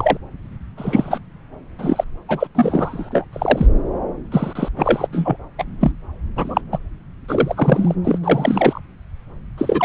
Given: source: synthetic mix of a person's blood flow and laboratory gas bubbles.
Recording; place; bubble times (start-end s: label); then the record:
Doppler ultrasound of blood flow; subclavian vein
0.00-0.17 s: bubbles
0.77-1.19 s: bubbles
1.79-2.04 s: bubbles
2.28-2.47 s: bubbles
2.54-3.24 s: bubbles
3.32-3.67 s: bubbles
4.32-4.69 s: bubbles
4.77-5.07 s: bubbles
5.12-5.37 s: bubbles
5.58-5.64 s: bubbles
5.81-5.92 s: bubbles
6.36-6.61 s: bubbles
6.72-6.78 s: bubbles
7.29-7.95 s: bubbles
8.04-8.18 s: bubbles
8.23-8.79 s: bubbles
9.57-9.85 s: bubbles
From the record:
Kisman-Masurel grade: 243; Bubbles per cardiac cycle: several, 3 to 8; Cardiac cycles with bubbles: 100%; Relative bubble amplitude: loud (0.450 to 0.775); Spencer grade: 3 (all of the cardiac periods contain showers or single bubble signals, but not dominating or overriding the cardiac motion signals); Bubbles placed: anywhere in the cardiac cycle